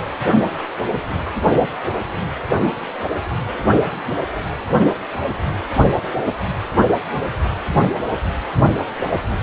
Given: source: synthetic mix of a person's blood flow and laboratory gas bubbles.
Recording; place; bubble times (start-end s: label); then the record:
Doppler ultrasound of blood flow; precordium
no bubbles
From the record:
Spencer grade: 0 (complete lack of bubble signals)